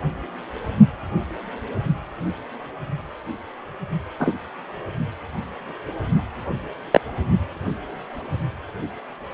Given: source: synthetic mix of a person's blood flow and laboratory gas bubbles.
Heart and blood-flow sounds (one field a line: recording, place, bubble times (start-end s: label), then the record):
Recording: Doppler ultrasound of blood flow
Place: precordium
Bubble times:
4.18-4.34 s: bubbles
6.91-7.00 s: bubbles
From the record:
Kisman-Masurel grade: 123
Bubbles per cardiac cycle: 1 to 2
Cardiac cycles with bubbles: 10 to 50%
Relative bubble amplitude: loud (0.450 to 0.775)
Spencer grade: 2 (many but less than half of the cardiac periods contain bubble signals, singularly or in groups)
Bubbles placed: only in the low amplitude regions of the cardiac cycle